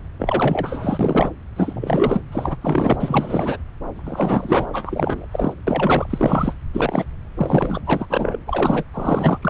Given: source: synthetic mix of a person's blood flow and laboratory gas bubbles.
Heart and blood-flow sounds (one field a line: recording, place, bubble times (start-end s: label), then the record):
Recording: Doppler ultrasound of blood flow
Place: subclavian vein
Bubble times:
0.19-1.30 s: bubbles
1.56-2.21 s: bubbles
2.31-2.56 s: bubbles
2.61-2.97 s: bubbles
3.00-3.57 s: bubbles
3.94-4.67 s: bubbles
4.72-5.26 s: bubbles
5.31-5.53 s: bubbles
5.67-6.06 s: bubbles
6.09-6.53 s: bubbles
6.73-7.04 s: bubbles
7.36-7.81 s: bubbles
7.86-8.06 s: bubbles
8.09-8.37 s: bubbles
8.46-8.83 s: bubbles
8.94-9.38 s: bubbles
9.42-9.50 s: bubbles
From the record:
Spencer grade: 3 (all of the cardiac periods contain showers or single bubble signals, but not dominating or overriding the cardiac motion signals)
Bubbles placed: anywhere in the cardiac cycle